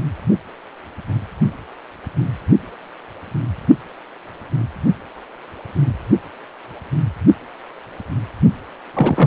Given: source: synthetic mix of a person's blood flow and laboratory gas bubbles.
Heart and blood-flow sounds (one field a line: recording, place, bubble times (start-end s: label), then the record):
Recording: Doppler ultrasound of blood flow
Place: precordium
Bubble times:
8.94-9.26 s: bubbles
From the record:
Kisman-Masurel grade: 113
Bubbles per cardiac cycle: 1 to 2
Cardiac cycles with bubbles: 1 to 10%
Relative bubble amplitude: loud (0.450 to 0.775)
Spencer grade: 1 (occasional bubble signal discernible with the cardiac motion signal, with majority of cardiac periods free of bubbles)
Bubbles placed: only in the low amplitude regions of the cardiac cycle